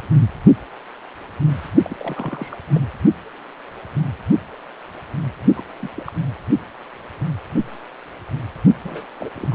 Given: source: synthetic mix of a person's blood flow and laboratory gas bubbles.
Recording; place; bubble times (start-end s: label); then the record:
Doppler ultrasound of blood flow; precordium
1.84-1.97 s: bubbles
1.99-2.56 s: bubbles
2.75-2.81 s: bubbles
5.55-5.64 s: bubbles
5.76-5.90 s: bubbles
5.96-6.12 s: bubbles
8.85-9.06 s: bubbles
9.20-9.29 s: bubbles
9.36-9.55 s: bubbles
From the record:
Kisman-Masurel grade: 221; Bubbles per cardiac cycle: several, 3 to 8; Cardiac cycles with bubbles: 10 to 50%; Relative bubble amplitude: barely perceptible (0.100 to 0.250); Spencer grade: 2 (many but less than half of the cardiac periods contain bubble signals, singularly or in groups); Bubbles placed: only in the low amplitude regions of the cardiac cycle